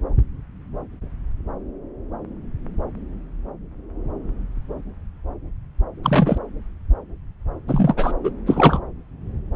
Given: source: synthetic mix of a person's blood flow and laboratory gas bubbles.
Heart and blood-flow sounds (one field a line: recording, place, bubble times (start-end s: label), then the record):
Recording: Doppler ultrasound of blood flow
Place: subclavian vein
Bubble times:
6.03-6.38 s: bubbles
7.67-8.12 s: bubbles
8.23-8.30 s: bubbles
8.46-8.80 s: bubbles
From the record:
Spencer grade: 2 (many but less than half of the cardiac periods contain bubble signals, singularly or in groups)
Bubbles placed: anywhere in the cardiac cycle